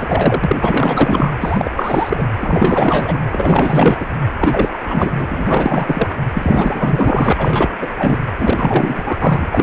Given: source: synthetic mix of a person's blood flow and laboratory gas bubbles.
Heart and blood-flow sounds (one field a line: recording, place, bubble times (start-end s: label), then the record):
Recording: Doppler ultrasound of blood flow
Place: precordium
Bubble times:
0.00-0.56 s: bubbles
0.61-1.33 s: bubbles
1.40-1.71 s: bubbles
1.75-2.27 s: bubbles
2.40-3.22 s: bubbles
3.32-4.08 s: bubbles
4.39-5.27 s: bubbles
5.31-6.15 s: bubbles
6.33-7.76 s: bubbles
7.81-8.18 s: bubbles
8.38-9.49 s: bubbles
9.51-9.63 s: bubbles
From the record:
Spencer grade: 4 (maximum detectable bubble signal sounding continuously throughout systole and diastole of every cardiac period, and overriding the amplitude of the normal cardiac signals)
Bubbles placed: anywhere in the cardiac cycle